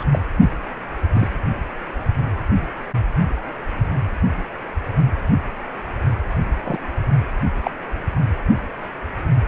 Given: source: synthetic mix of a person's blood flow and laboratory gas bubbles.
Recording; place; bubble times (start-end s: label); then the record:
Doppler ultrasound of blood flow; precordium
0.00-0.04 s: bubbles
0.12-0.19 s: bubbles
1.14-1.27 s: bubbles
6.64-6.80 s: bubbles
7.64-7.71 s: bubbles
From the record:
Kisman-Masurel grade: 122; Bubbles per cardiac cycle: 1 to 2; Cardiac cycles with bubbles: 10 to 50%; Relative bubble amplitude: moderate (0.250 to 0.450); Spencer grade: 2 (many but less than half of the cardiac periods contain bubble signals, singularly or in groups); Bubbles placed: only in the low amplitude regions of the cardiac cycle